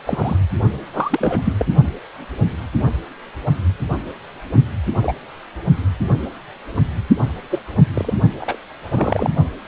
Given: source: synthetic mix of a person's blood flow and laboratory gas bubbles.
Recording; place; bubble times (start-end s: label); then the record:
Doppler ultrasound of blood flow; precordium
0.05-0.37 s: bubbles
0.93-1.41 s: bubbles
1.45-1.53 s: bubbles
1.59-1.66 s: bubbles
5.01-5.15 s: bubbles
7.50-7.59 s: bubbles
7.94-8.13 s: bubbles
8.40-8.58 s: bubbles
8.92-9.30 s: bubbles
From the record:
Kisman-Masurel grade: 232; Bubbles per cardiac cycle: several, 3 to 8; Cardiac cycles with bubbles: 50 to 99%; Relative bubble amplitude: moderate (0.250 to 0.450); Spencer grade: 3 (all of the cardiac periods contain showers or single bubble signals, but not dominating or overriding the cardiac motion signals); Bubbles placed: only in the low amplitude regions of the cardiac cycle